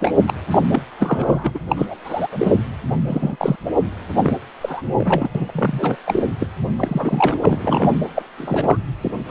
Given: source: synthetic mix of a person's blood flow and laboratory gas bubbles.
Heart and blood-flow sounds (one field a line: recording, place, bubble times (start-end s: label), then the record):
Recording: Doppler ultrasound of blood flow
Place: precordium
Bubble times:
0.00-0.33 s: bubbles
0.51-0.58 s: bubbles
0.70-0.84 s: bubbles
0.98-1.52 s: bubbles
1.54-1.58 s: bubbles
1.68-1.96 s: bubbles
2.04-2.27 s: bubbles
2.31-2.54 s: bubbles
3.06-3.37 s: bubbles
3.39-3.56 s: bubbles
3.65-3.71 s: bubbles
4.15-4.33 s: bubbles
4.61-4.82 s: bubbles
4.97-5.31 s: bubbles
5.34-5.96 s: bubbles
6.07-6.23 s: bubbles
6.39-6.47 s: bubbles
6.77-7.95 s: bubbles
8.14-8.22 s: bubbles
8.38-8.76 s: bubbles
9.01-9.12 s: bubbles
9.28-9.31 s: bubbles
From the record:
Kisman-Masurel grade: 242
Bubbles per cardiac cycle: several, 3 to 8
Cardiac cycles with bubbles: 100%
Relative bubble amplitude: moderate (0.250 to 0.450)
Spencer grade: 3 (all of the cardiac periods contain showers or single bubble signals, but not dominating or overriding the cardiac motion signals)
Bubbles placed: anywhere in the cardiac cycle